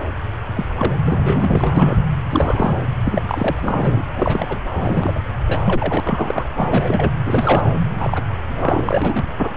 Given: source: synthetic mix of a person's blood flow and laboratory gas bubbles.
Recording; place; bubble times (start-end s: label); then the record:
Doppler ultrasound of blood flow; subclavian vein
0.55-0.66 s: bubbles
0.78-0.95 s: bubbles
1.04-1.73 s: bubbles
1.76-2.02 s: bubbles
2.30-2.77 s: bubbles
3.04-3.21 s: bubbles
3.27-4.04 s: bubbles
4.14-4.58 s: bubbles
4.75-5.21 s: bubbles
5.48-6.00 s: bubbles
6.04-6.48 s: bubbles
6.57-7.12 s: bubbles
7.25-7.65 s: bubbles
7.94-8.23 s: bubbles
8.47-9.25 s: bubbles
9.38-9.51 s: bubbles
From the record:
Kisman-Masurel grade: 242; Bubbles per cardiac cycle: several, 3 to 8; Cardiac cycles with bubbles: 100%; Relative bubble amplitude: moderate (0.250 to 0.450); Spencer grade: 3 (all of the cardiac periods contain showers or single bubble signals, but not dominating or overriding the cardiac motion signals); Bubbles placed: anywhere in the cardiac cycle